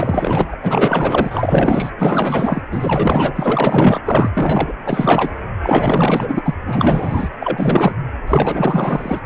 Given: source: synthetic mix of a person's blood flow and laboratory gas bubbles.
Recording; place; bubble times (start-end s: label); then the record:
Doppler ultrasound of blood flow; precordium
0.00-0.56 s: bubbles
0.63-1.92 s: bubbles
1.98-2.62 s: bubbles
2.71-4.00 s: bubbles
4.05-4.30 s: bubbles
4.34-4.72 s: bubbles
4.85-5.31 s: bubbles
5.62-6.42 s: bubbles
6.45-6.54 s: bubbles
6.60-7.29 s: bubbles
7.42-7.94 s: bubbles
8.27-9.20 s: bubbles
From the record:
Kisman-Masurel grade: 444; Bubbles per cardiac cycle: continuous sound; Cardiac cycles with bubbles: 100%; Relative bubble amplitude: maximal (0.775 to 0.999); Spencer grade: 4 (maximum detectable bubble signal sounding continuously throughout systole and diastole of every cardiac period, and overriding the amplitude of the normal cardiac signals); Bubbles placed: anywhere in the cardiac cycle